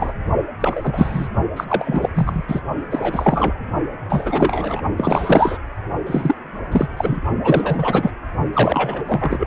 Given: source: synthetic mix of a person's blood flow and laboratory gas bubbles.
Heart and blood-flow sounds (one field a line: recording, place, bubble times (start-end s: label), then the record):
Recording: Doppler ultrasound of blood flow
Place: precordium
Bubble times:
0.00-0.13 s: bubbles
0.60-1.28 s: bubbles
1.56-1.65 s: bubbles
1.68-2.09 s: bubbles
2.15-2.45 s: bubbles
2.48-2.60 s: bubbles
2.90-3.54 s: bubbles
4.09-4.81 s: bubbles
4.97-5.58 s: bubbles
6.06-6.35 s: bubbles
6.71-6.88 s: bubbles
6.96-7.21 s: bubbles
7.44-8.11 s: bubbles
8.53-9.04 s: bubbles
9.08-9.46 s: bubbles
From the record:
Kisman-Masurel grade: 343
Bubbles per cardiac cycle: rolling drumbeat, 9 or more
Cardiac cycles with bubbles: 100%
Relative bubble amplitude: loud (0.450 to 0.775)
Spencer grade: 3 (all of the cardiac periods contain showers or single bubble signals, but not dominating or overriding the cardiac motion signals)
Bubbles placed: only in the low amplitude regions of the cardiac cycle